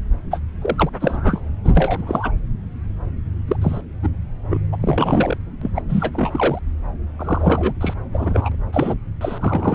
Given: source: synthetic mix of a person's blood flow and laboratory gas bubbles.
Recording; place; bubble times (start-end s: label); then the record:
Doppler ultrasound of blood flow; subclavian vein
0.31-0.39 s: bubbles
0.61-0.90 s: bubbles
1.00-1.41 s: bubbles
1.64-1.70 s: bubbles
1.74-2.30 s: bubbles
3.47-3.56 s: bubbles
3.61-3.81 s: bubbles
4.03-4.08 s: bubbles
4.50-4.58 s: bubbles
4.72-4.77 s: bubbles
4.80-5.37 s: bubbles
5.61-5.71 s: bubbles
5.75-5.82 s: bubbles
5.89-6.59 s: bubbles
7.19-7.74 s: bubbles
7.81-7.94 s: bubbles
8.12-8.55 s: bubbles
8.72-8.95 s: bubbles
9.21-9.75 s: bubbles
From the record:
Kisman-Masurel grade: 232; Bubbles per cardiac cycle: several, 3 to 8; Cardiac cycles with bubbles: 50 to 99%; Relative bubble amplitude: moderate (0.250 to 0.450); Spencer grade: 3 (all of the cardiac periods contain showers or single bubble signals, but not dominating or overriding the cardiac motion signals); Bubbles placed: anywhere in the cardiac cycle